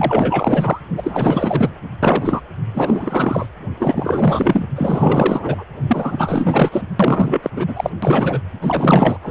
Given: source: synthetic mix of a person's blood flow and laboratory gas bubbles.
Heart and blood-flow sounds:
Doppler ultrasound of blood flow; precordium
0.00-0.82 s: bubbles
0.96-1.70 s: bubbles
2.02-2.42 s: bubbles
2.74-3.46 s: bubbles
3.79-4.66 s: bubbles
4.75-5.64 s: bubbles
5.87-6.69 s: bubbles
6.72-6.82 s: bubbles
6.99-7.50 s: bubbles
7.55-7.90 s: bubbles
8.02-8.39 s: bubbles
8.61-9.18 s: bubbles
9.22-9.31 s: bubbles
From the record:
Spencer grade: 4 (maximum detectable bubble signal sounding continuously throughout systole and diastole of every cardiac period, and overriding the amplitude of the normal cardiac signals); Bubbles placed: anywhere in the cardiac cycle

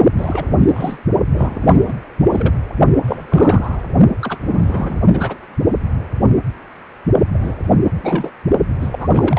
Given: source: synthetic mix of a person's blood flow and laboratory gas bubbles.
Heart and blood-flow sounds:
Doppler ultrasound of blood flow; precordium
0.17-0.97 s: bubbles
1.28-1.93 s: bubbles
2.22-2.29 s: bubbles
2.32-2.54 s: bubbles
3.03-3.81 s: bubbles
4.21-4.38 s: bubbles
4.46-5.00 s: bubbles
5.12-5.38 s: bubbles
7.33-7.54 s: bubbles
8.03-8.30 s: bubbles
8.80-9.09 s: bubbles
9.12-9.39 s: bubbles
From the record:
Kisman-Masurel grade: 332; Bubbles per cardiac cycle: rolling drumbeat, 9 or more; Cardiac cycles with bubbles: 50 to 99%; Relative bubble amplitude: moderate (0.250 to 0.450); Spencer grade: 3 (all of the cardiac periods contain showers or single bubble signals, but not dominating or overriding the cardiac motion signals); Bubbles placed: only in the low amplitude regions of the cardiac cycle

